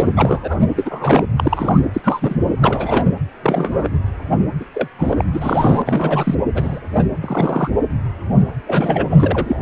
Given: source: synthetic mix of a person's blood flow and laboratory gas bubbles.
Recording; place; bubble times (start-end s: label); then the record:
Doppler ultrasound of blood flow; precordium
0.00-0.08 s: bubbles
0.14-0.60 s: bubbles
0.76-1.25 s: bubbles
1.38-1.80 s: bubbles
1.93-2.01 s: bubbles
2.04-2.35 s: bubbles
2.61-3.04 s: bubbles
3.43-3.89 s: bubbles
4.60-4.65 s: bubbles
4.74-4.88 s: bubbles
4.99-5.14 s: bubbles
5.17-5.25 s: bubbles
5.33-5.82 s: bubbles
5.86-6.35 s: bubbles
6.54-6.79 s: bubbles
6.99-7.04 s: bubbles
7.21-7.70 s: bubbles
8.67-9.07 s: bubbles
9.10-9.60 s: bubbles
From the record:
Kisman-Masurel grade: 232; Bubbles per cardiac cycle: several, 3 to 8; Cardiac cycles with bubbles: 50 to 99%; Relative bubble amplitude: moderate (0.250 to 0.450); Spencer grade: 3 (all of the cardiac periods contain showers or single bubble signals, but not dominating or overriding the cardiac motion signals); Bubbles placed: anywhere in the cardiac cycle